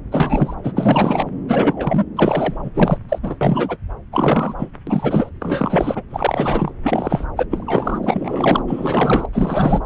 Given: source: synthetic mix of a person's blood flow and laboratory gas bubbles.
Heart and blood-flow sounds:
Doppler ultrasound of blood flow; subclavian vein
0.11-0.55 s: bubbles
0.64-0.72 s: bubbles
0.76-1.25 s: bubbles
1.47-2.04 s: bubbles
2.16-2.71 s: bubbles
2.74-2.98 s: bubbles
3.08-3.19 s: bubbles
3.23-3.35 s: bubbles
3.41-3.78 s: bubbles
4.12-4.54 s: bubbles
4.58-4.69 s: bubbles
4.87-5.29 s: bubbles
5.41-6.03 s: bubbles
6.11-6.71 s: bubbles
6.84-7.25 s: bubbles
7.36-7.46 s: bubbles
7.51-7.98 s: bubbles
8.03-8.62 s: bubbles
8.67-9.26 s: bubbles
9.33-9.81 s: bubbles
From the record:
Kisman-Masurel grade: 343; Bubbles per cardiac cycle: rolling drumbeat, 9 or more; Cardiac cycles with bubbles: 100%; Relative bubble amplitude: loud (0.450 to 0.775); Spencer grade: 3 (all of the cardiac periods contain showers or single bubble signals, but not dominating or overriding the cardiac motion signals); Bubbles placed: anywhere in the cardiac cycle

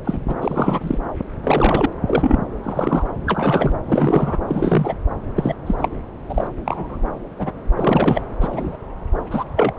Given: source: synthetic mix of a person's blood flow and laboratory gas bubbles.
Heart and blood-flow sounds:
Doppler ultrasound of blood flow; subclavian vein
0.05-0.20 s: bubbles
0.27-0.36 s: bubbles
0.41-0.98 s: bubbles
1.43-1.86 s: bubbles
2.07-2.38 s: bubbles
2.63-3.04 s: bubbles
3.26-3.72 s: bubbles
3.86-4.37 s: bubbles
4.47-4.94 s: bubbles
5.36-5.54 s: bubbles
5.66-5.75 s: bubbles
5.78-5.88 s: bubbles
6.29-6.48 s: bubbles
6.65-6.98 s: bubbles
7.38-7.52 s: bubbles
7.76-8.21 s: bubbles
8.40-8.77 s: bubbles
9.30-9.44 s: bubbles
9.55-9.72 s: bubbles
From the record:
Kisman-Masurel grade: 242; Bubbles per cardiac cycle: several, 3 to 8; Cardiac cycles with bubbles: 100%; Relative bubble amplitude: moderate (0.250 to 0.450); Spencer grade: 3 (all of the cardiac periods contain showers or single bubble signals, but not dominating or overriding the cardiac motion signals); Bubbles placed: anywhere in the cardiac cycle

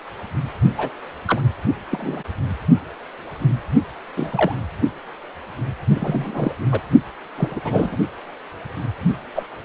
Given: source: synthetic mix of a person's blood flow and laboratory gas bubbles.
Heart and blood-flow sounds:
Doppler ultrasound of blood flow; precordium
0.77-0.89 s: bubbles
1.27-1.42 s: bubbles
1.91-2.23 s: bubbles
4.16-4.58 s: bubbles
5.96-6.54 s: bubbles
6.71-6.81 s: bubbles
7.38-7.60 s: bubbles
7.65-7.98 s: bubbles
9.34-9.43 s: bubbles
From the record:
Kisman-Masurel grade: 232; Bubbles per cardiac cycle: several, 3 to 8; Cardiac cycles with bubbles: 50 to 99%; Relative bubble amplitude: moderate (0.250 to 0.450); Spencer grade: 3 (all of the cardiac periods contain showers or single bubble signals, but not dominating or overriding the cardiac motion signals); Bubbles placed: only in the low amplitude regions of the cardiac cycle

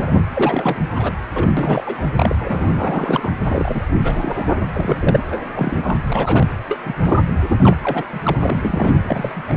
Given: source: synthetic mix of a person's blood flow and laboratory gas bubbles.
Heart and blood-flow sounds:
Doppler ultrasound of blood flow; precordium
0.00-0.13 s: bubbles
0.34-0.77 s: bubbles
0.93-1.11 s: bubbles
1.33-1.52 s: bubbles
1.56-1.83 s: bubbles
1.86-2.02 s: bubbles
2.17-2.35 s: bubbles
2.39-3.30 s: bubbles
3.39-3.85 s: bubbles
4.04-4.46 s: bubbles
4.72-5.20 s: bubbles
5.31-5.37 s: bubbles
5.54-5.97 s: bubbles
6.07-6.46 s: bubbles
6.68-6.80 s: bubbles
6.84-6.96 s: bubbles
7.03-7.22 s: bubbles
7.48-7.57 s: bubbles
7.59-7.76 s: bubbles
7.83-8.04 s: bubbles
8.12-8.21 s: bubbles
8.23-8.37 s: bubbles
8.43-8.95 s: bubbles
9.07-9.42 s: bubbles
9.48-9.57 s: bubbles
From the record:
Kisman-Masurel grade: 242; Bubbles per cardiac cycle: several, 3 to 8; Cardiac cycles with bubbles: 100%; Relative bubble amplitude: moderate (0.250 to 0.450); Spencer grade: 3 (all of the cardiac periods contain showers or single bubble signals, but not dominating or overriding the cardiac motion signals); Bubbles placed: anywhere in the cardiac cycle

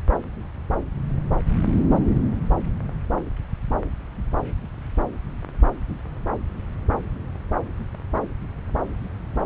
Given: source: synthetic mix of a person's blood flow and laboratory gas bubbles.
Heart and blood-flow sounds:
Doppler ultrasound of blood flow; subclavian vein
no bubbles
From the record:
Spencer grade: 0 (complete lack of bubble signals)

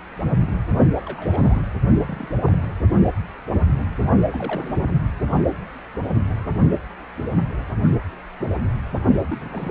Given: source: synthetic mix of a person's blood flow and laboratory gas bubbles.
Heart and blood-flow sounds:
Doppler ultrasound of blood flow; precordium
1.06-1.62 s: bubbles
1.86-2.29 s: bubbles
2.41-2.62 s: bubbles
4.29-5.00 s: bubbles
9.24-9.71 s: bubbles
From the record:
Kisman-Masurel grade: 221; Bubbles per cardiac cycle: several, 3 to 8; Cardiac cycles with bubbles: 10 to 50%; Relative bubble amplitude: barely perceptible (0.100 to 0.250); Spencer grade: 2 (many but less than half of the cardiac periods contain bubble signals, singularly or in groups); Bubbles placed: only in the low amplitude regions of the cardiac cycle

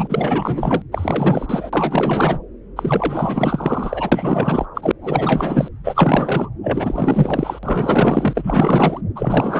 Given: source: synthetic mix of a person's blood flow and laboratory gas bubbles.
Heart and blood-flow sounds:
Doppler ultrasound of blood flow; subclavian vein
0.00-0.82 s: bubbles
0.91-1.70 s: bubbles
1.73-2.39 s: bubbles
2.76-4.67 s: bubbles
4.74-4.92 s: bubbles
5.01-5.68 s: bubbles
5.84-6.49 s: bubbles
6.63-7.59 s: bubbles
7.63-9.00 s: bubbles
9.15-9.60 s: bubbles
From the record:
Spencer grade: 4 (maximum detectable bubble signal sounding continuously throughout systole and diastole of every cardiac period, and overriding the amplitude of the normal cardiac signals); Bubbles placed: anywhere in the cardiac cycle

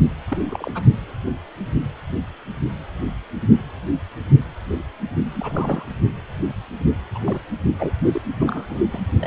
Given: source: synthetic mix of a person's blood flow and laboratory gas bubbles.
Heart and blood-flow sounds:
Doppler ultrasound of blood flow; precordium
0.27-0.82 s: bubbles
5.33-5.85 s: bubbles
7.14-7.19 s: bubbles
7.24-7.41 s: bubbles
7.77-7.92 s: bubbles
8.12-8.21 s: bubbles
8.38-8.79 s: bubbles
8.92-9.01 s: bubbles
9.20-9.27 s: bubbles
From the record:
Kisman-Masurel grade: 221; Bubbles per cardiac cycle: several, 3 to 8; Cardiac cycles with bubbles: 10 to 50%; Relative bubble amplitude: barely perceptible (0.100 to 0.250); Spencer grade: 2 (many but less than half of the cardiac periods contain bubble signals, singularly or in groups); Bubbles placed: only in the low amplitude regions of the cardiac cycle

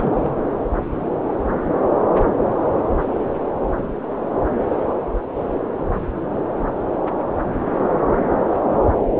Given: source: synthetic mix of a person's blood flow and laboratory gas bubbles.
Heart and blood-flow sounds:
Doppler ultrasound of blood flow; subclavian vein
0.00-0.36 s: bubbles
From the record:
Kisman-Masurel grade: 211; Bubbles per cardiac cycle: several, 3 to 8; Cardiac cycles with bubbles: 1 to 10%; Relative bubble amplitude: barely perceptible (0.100 to 0.250); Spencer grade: 1 (occasional bubble signal discernible with the cardiac motion signal, with majority of cardiac periods free of bubbles); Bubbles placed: anywhere in the cardiac cycle

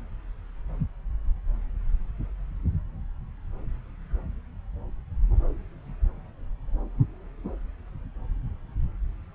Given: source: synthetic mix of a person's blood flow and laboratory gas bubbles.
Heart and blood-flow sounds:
Doppler ultrasound of blood flow; subclavian vein
no bubbles
From the record:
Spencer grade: 0 (complete lack of bubble signals)

